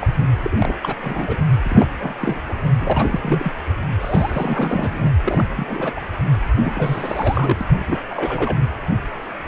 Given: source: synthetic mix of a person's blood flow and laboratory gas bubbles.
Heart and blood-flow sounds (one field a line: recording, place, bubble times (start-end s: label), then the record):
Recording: Doppler ultrasound of blood flow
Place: precordium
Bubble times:
0.00-0.08 s: bubbles
0.18-0.27 s: bubbles
0.43-0.56 s: bubbles
0.58-0.76 s: bubbles
0.82-0.94 s: bubbles
1.03-1.37 s: bubbles
1.62-1.88 s: bubbles
1.99-2.13 s: bubbles
2.20-2.41 s: bubbles
2.48-2.54 s: bubbles
2.81-3.52 s: bubbles
3.99-5.11 s: bubbles
5.22-5.44 s: bubbles
5.49-5.65 s: bubbles
5.68-5.93 s: bubbles
5.97-6.01 s: bubbles
6.64-7.57 s: bubbles
7.61-7.66 s: bubbles
7.79-8.01 s: bubbles
8.09-8.62 s: bubbles
From the record:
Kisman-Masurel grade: 332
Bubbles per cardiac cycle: rolling drumbeat, 9 or more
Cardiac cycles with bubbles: 50 to 99%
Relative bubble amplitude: moderate (0.250 to 0.450)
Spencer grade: 3 (all of the cardiac periods contain showers or single bubble signals, but not dominating or overriding the cardiac motion signals)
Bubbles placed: anywhere in the cardiac cycle